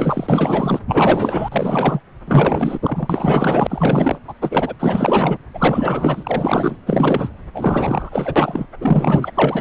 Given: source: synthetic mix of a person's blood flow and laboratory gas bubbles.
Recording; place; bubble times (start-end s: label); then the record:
Doppler ultrasound of blood flow; subclavian vein
0.00-0.79 s: bubbles
0.87-1.48 s: bubbles
1.52-2.01 s: bubbles
2.27-2.78 s: bubbles
2.82-4.19 s: bubbles
4.28-4.33 s: bubbles
4.41-4.74 s: bubbles
4.79-5.38 s: bubbles
5.53-6.77 s: bubbles
6.87-7.29 s: bubbles
7.54-8.66 s: bubbles
8.80-9.31 s: bubbles
9.34-9.61 s: bubbles
From the record:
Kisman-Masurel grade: 444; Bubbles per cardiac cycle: continuous sound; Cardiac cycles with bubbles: 100%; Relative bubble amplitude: maximal (0.775 to 0.999); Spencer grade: 4 (maximum detectable bubble signal sounding continuously throughout systole and diastole of every cardiac period, and overriding the amplitude of the normal cardiac signals); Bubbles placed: anywhere in the cardiac cycle